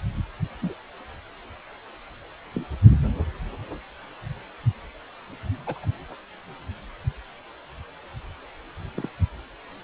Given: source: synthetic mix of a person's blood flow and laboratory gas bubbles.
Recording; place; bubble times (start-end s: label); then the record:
Doppler ultrasound of blood flow; precordium
0.61-0.73 s: bubbles
2.52-2.67 s: bubbles
5.67-5.85 s: bubbles
8.95-9.10 s: bubbles
From the record:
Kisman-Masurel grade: 121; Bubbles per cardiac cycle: 1 to 2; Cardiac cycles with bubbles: 10 to 50%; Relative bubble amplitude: barely perceptible (0.100 to 0.250); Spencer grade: 2 (many but less than half of the cardiac periods contain bubble signals, singularly or in groups); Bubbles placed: anywhere in the cardiac cycle